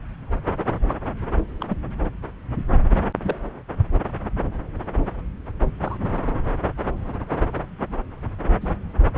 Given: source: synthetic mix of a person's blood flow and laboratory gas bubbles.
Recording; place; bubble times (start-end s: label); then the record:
Doppler ultrasound of blood flow; subclavian vein
0.89-0.96 s: bubbles
1.60-1.65 s: bubbles
1.69-1.76 s: bubbles
3.23-3.36 s: bubbles
5.83-5.98 s: bubbles
8.60-8.68 s: bubbles
From the record:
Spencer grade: 2 (many but less than half of the cardiac periods contain bubble signals, singularly or in groups); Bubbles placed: anywhere in the cardiac cycle